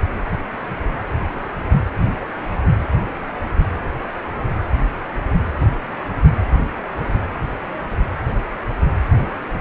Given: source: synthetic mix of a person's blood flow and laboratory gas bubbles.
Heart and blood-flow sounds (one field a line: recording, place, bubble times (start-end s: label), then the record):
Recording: Doppler ultrasound of blood flow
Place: precordium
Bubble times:
no bubbles
From the record:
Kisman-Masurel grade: 000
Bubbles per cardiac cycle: 0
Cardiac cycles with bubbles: 0%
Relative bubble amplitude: no bubbles discernible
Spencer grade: 0 (complete lack of bubble signals)